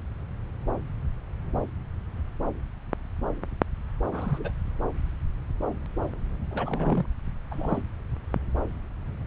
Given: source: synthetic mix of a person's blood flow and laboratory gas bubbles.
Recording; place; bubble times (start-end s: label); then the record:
Doppler ultrasound of blood flow; subclavian vein
4.12-4.51 s: bubbles
6.51-7.06 s: bubbles
7.51-7.82 s: bubbles
From the record:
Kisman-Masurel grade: 221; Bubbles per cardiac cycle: several, 3 to 8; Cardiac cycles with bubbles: 10 to 50%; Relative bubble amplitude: barely perceptible (0.100 to 0.250); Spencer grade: 2 (many but less than half of the cardiac periods contain bubble signals, singularly or in groups); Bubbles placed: anywhere in the cardiac cycle